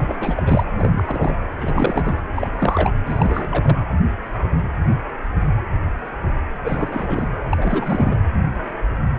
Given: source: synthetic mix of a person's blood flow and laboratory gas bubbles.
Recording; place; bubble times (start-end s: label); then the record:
Doppler ultrasound of blood flow; precordium
0.00-0.43 s: bubbles
0.46-0.65 s: bubbles
0.78-1.03 s: bubbles
1.06-1.38 s: bubbles
1.58-2.21 s: bubbles
2.35-2.48 s: bubbles
2.58-2.92 s: bubbles
3.06-3.78 s: bubbles
6.64-7.26 s: bubbles
7.49-8.15 s: bubbles
From the record:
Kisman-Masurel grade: 332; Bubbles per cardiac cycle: rolling drumbeat, 9 or more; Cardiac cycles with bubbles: 50 to 99%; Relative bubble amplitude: moderate (0.250 to 0.450); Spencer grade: 3 (all of the cardiac periods contain showers or single bubble signals, but not dominating or overriding the cardiac motion signals); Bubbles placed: anywhere in the cardiac cycle